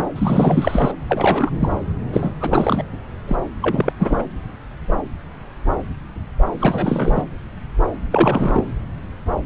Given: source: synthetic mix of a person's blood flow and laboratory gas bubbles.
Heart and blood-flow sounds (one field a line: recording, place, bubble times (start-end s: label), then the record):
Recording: Doppler ultrasound of blood flow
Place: subclavian vein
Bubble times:
0.00-0.08 s: bubbles
0.16-0.92 s: bubbles
1.08-1.50 s: bubbles
1.59-1.69 s: bubbles
2.12-2.31 s: bubbles
2.40-2.84 s: bubbles
3.27-3.36 s: bubbles
3.62-3.93 s: bubbles
3.99-4.23 s: bubbles
6.59-7.23 s: bubbles
8.12-8.67 s: bubbles
From the record:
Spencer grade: 3 (all of the cardiac periods contain showers or single bubble signals, but not dominating or overriding the cardiac motion signals)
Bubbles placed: anywhere in the cardiac cycle